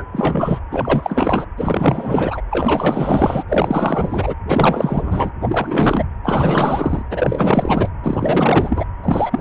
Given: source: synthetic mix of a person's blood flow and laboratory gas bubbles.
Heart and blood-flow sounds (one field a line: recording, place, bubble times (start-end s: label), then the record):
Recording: Doppler ultrasound of blood flow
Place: precordium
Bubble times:
0.00-0.05 s: bubbles
0.11-0.59 s: bubbles
0.71-1.46 s: bubbles
1.57-2.41 s: bubbles
2.50-3.43 s: bubbles
3.48-4.34 s: bubbles
4.47-5.31 s: bubbles
5.41-6.05 s: bubbles
6.24-7.02 s: bubbles
7.10-7.89 s: bubbles
8.03-8.86 s: bubbles
9.03-9.40 s: bubbles
From the record:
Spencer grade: 4 (maximum detectable bubble signal sounding continuously throughout systole and diastole of every cardiac period, and overriding the amplitude of the normal cardiac signals)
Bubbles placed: anywhere in the cardiac cycle